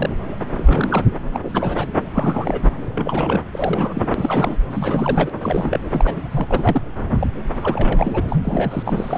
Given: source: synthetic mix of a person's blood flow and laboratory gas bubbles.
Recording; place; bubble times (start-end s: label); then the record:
Doppler ultrasound of blood flow; subclavian vein
0.00-0.10 s: bubbles
0.56-1.06 s: bubbles
1.33-1.39 s: bubbles
1.43-1.87 s: bubbles
2.12-2.60 s: bubbles
2.62-2.69 s: bubbles
2.95-3.41 s: bubbles
3.52-4.55 s: bubbles
4.71-5.30 s: bubbles
5.42-5.79 s: bubbles
5.92-6.16 s: bubbles
6.30-6.82 s: bubbles
7.15-7.27 s: bubbles
7.61-9.18 s: bubbles
From the record:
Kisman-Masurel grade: 342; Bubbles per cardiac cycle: rolling drumbeat, 9 or more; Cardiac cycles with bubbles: 100%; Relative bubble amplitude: moderate (0.250 to 0.450); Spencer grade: 3 (all of the cardiac periods contain showers or single bubble signals, but not dominating or overriding the cardiac motion signals); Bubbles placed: anywhere in the cardiac cycle